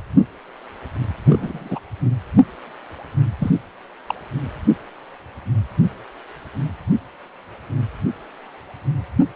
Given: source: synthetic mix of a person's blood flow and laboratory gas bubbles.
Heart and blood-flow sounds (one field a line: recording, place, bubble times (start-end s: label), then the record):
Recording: Doppler ultrasound of blood flow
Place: precordium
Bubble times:
1.26-1.79 s: bubbles
3.40-3.50 s: bubbles
4.07-4.15 s: bubbles
From the record:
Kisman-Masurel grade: 222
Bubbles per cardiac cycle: several, 3 to 8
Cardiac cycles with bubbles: 10 to 50%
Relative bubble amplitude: moderate (0.250 to 0.450)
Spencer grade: 2 (many but less than half of the cardiac periods contain bubble signals, singularly or in groups)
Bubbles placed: anywhere in the cardiac cycle